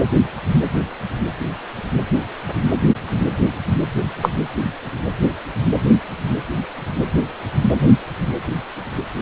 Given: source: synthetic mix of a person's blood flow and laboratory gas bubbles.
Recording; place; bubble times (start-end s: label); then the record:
Doppler ultrasound of blood flow; precordium
4.22-4.29 s: bubbles
From the record:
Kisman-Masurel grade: 113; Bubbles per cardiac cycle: 1 to 2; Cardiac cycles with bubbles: 1 to 10%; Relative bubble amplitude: loud (0.450 to 0.775); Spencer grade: 1 (occasional bubble signal discernible with the cardiac motion signal, with majority of cardiac periods free of bubbles); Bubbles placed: anywhere in the cardiac cycle